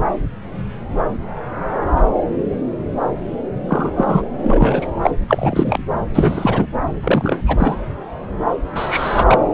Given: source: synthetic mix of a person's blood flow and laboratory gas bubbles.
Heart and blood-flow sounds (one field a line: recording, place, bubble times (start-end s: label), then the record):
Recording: Doppler ultrasound of blood flow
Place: subclavian vein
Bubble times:
3.68-4.23 s: bubbles
4.43-4.87 s: bubbles
5.01-5.10 s: bubbles
5.28-5.83 s: bubbles
6.14-6.67 s: bubbles
7.01-7.41 s: bubbles
7.45-7.78 s: bubbles
8.75-9.38 s: bubbles
From the record:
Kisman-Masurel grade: 233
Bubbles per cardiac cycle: several, 3 to 8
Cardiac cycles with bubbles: 50 to 99%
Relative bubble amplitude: loud (0.450 to 0.775)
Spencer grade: 3 (all of the cardiac periods contain showers or single bubble signals, but not dominating or overriding the cardiac motion signals)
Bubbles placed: anywhere in the cardiac cycle